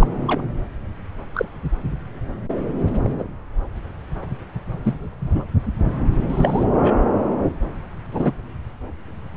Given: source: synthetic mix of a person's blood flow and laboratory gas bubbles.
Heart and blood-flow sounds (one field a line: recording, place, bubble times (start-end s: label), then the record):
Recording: Doppler ultrasound of blood flow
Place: subclavian vein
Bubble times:
0.00-0.07 s: bubbles
0.27-0.41 s: bubbles
1.34-1.45 s: bubbles
3.04-3.23 s: bubbles
4.84-5.07 s: bubbles
5.19-5.45 s: bubbles
6.29-6.63 s: bubbles
6.77-6.94 s: bubbles
8.12-8.32 s: bubbles
From the record:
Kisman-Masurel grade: 122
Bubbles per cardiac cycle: 1 to 2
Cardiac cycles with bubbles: 10 to 50%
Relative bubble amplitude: moderate (0.250 to 0.450)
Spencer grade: 2 (many but less than half of the cardiac periods contain bubble signals, singularly or in groups)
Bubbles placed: anywhere in the cardiac cycle